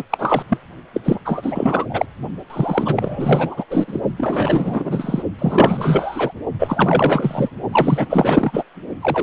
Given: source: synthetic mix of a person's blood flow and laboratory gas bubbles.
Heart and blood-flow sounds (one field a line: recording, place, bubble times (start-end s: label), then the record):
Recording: Doppler ultrasound of blood flow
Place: precordium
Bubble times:
0.00-0.04 s: bubbles
0.10-0.42 s: bubbles
0.49-0.57 s: bubbles
0.93-1.01 s: bubbles
1.04-1.22 s: bubbles
1.25-1.86 s: bubbles
1.89-2.05 s: bubbles
2.49-3.64 s: bubbles
3.70-4.00 s: bubbles
4.17-5.22 s: bubbles
5.38-6.32 s: bubbles
6.58-7.50 s: bubbles
7.71-8.06 s: bubbles
8.10-8.63 s: bubbles
9.01-9.23 s: bubbles
From the record:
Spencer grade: 4 (maximum detectable bubble signal sounding continuously throughout systole and diastole of every cardiac period, and overriding the amplitude of the normal cardiac signals)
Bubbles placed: only in the low amplitude regions of the cardiac cycle